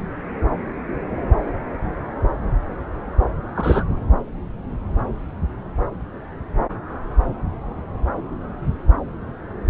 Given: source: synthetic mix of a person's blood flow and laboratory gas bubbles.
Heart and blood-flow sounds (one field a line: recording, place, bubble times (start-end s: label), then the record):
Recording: Doppler ultrasound of blood flow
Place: subclavian vein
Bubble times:
3.55-3.83 s: bubbles
From the record:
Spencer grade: 1 (occasional bubble signal discernible with the cardiac motion signal, with majority of cardiac periods free of bubbles)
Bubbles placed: anywhere in the cardiac cycle